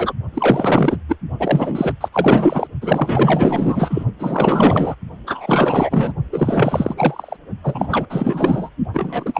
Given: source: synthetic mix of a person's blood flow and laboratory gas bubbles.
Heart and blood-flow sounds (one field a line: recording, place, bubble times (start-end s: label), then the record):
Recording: Doppler ultrasound of blood flow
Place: precordium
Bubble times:
0.00-0.13 s: bubbles
0.34-0.97 s: bubbles
1.08-1.16 s: bubbles
1.40-1.95 s: bubbles
2.01-2.08 s: bubbles
2.12-2.67 s: bubbles
2.81-4.05 s: bubbles
4.19-4.95 s: bubbles
5.26-6.12 s: bubbles
6.32-7.36 s: bubbles
7.63-8.05 s: bubbles
8.09-8.70 s: bubbles
8.94-9.39 s: bubbles
From the record:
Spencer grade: 4 (maximum detectable bubble signal sounding continuously throughout systole and diastole of every cardiac period, and overriding the amplitude of the normal cardiac signals)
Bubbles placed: only in the low amplitude regions of the cardiac cycle